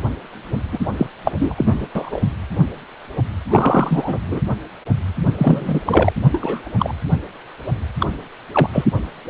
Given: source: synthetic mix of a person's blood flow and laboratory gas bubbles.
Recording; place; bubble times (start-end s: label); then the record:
Doppler ultrasound of blood flow; precordium
0.71-0.79 s: bubbles
0.98-1.07 s: bubbles
1.24-1.88 s: bubbles
1.95-2.21 s: bubbles
3.50-4.19 s: bubbles
4.28-4.41 s: bubbles
5.38-5.80 s: bubbles
5.85-6.12 s: bubbles
6.32-6.69 s: bubbles
6.79-6.93 s: bubbles
8.00-8.06 s: bubbles
8.52-8.69 s: bubbles
8.72-8.85 s: bubbles
From the record:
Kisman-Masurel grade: 233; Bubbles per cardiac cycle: several, 3 to 8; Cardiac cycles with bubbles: 50 to 99%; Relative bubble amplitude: loud (0.450 to 0.775); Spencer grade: 3 (all of the cardiac periods contain showers or single bubble signals, but not dominating or overriding the cardiac motion signals); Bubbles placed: anywhere in the cardiac cycle